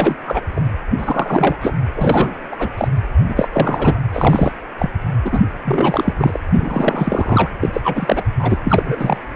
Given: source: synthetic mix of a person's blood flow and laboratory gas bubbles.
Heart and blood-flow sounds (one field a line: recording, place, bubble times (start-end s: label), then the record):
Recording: Doppler ultrasound of blood flow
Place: precordium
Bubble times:
0.00-0.16 s: bubbles
0.26-0.42 s: bubbles
0.56-0.60 s: bubbles
0.97-1.56 s: bubbles
1.61-1.73 s: bubbles
1.96-2.39 s: bubbles
2.51-2.69 s: bubbles
2.78-2.88 s: bubbles
3.28-3.48 s: bubbles
3.52-4.02 s: bubbles
4.13-4.53 s: bubbles
4.78-4.90 s: bubbles
5.25-5.40 s: bubbles
5.65-6.13 s: bubbles
6.17-6.40 s: bubbles
6.53-7.49 s: bubbles
7.61-7.69 s: bubbles
7.73-8.23 s: bubbles
8.39-8.57 s: bubbles
8.64-9.17 s: bubbles
From the record:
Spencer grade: 3 (all of the cardiac periods contain showers or single bubble signals, but not dominating or overriding the cardiac motion signals)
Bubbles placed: anywhere in the cardiac cycle